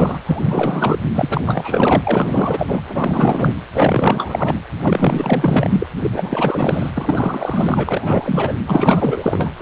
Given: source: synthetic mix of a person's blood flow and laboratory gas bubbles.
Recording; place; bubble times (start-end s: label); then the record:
Doppler ultrasound of blood flow; precordium
0.00-0.19 s: bubbles
0.26-0.99 s: bubbles
1.15-2.81 s: bubbles
2.87-3.56 s: bubbles
3.73-4.60 s: bubbles
4.81-5.87 s: bubbles
6.01-6.90 s: bubbles
6.95-8.54 s: bubbles
8.66-9.51 s: bubbles
9.57-9.62 s: bubbles
From the record:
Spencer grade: 4 (maximum detectable bubble signal sounding continuously throughout systole and diastole of every cardiac period, and overriding the amplitude of the normal cardiac signals); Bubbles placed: anywhere in the cardiac cycle